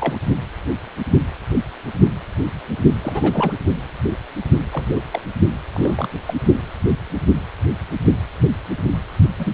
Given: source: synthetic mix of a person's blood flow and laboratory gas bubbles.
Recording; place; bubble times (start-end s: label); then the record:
Doppler ultrasound of blood flow; precordium
0.00-0.18 s: bubbles
3.01-3.52 s: bubbles
4.72-5.02 s: bubbles
5.10-5.21 s: bubbles
5.72-6.08 s: bubbles
6.25-6.34 s: bubbles
9.39-9.53 s: bubbles
From the record:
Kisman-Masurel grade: 222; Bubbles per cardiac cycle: several, 3 to 8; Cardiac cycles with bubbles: 10 to 50%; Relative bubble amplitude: moderate (0.250 to 0.450); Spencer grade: 2 (many but less than half of the cardiac periods contain bubble signals, singularly or in groups); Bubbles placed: only in the low amplitude regions of the cardiac cycle